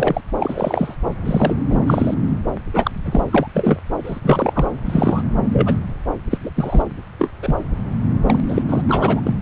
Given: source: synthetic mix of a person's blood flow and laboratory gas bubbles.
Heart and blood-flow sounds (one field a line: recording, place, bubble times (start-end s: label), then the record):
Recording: Doppler ultrasound of blood flow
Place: subclavian vein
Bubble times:
0.00-0.21 s: bubbles
0.39-0.95 s: bubbles
1.25-1.54 s: bubbles
1.70-1.79 s: bubbles
1.86-2.15 s: bubbles
2.73-2.91 s: bubbles
3.04-3.23 s: bubbles
3.31-3.47 s: bubbles
3.54-3.79 s: bubbles
4.04-4.21 s: bubbles
4.24-4.68 s: bubbles
4.86-5.23 s: bubbles
5.53-5.78 s: bubbles
6.30-6.38 s: bubbles
6.41-6.50 s: bubbles
6.56-6.82 s: bubbles
7.18-7.30 s: bubbles
7.42-7.55 s: bubbles
8.24-8.40 s: bubbles
8.48-8.62 s: bubbles
8.68-8.81 s: bubbles
8.88-9.20 s: bubbles
9.24-9.34 s: bubbles
From the record:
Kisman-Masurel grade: 243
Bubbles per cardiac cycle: several, 3 to 8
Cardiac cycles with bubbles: 100%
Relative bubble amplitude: loud (0.450 to 0.775)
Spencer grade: 3 (all of the cardiac periods contain showers or single bubble signals, but not dominating or overriding the cardiac motion signals)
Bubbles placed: anywhere in the cardiac cycle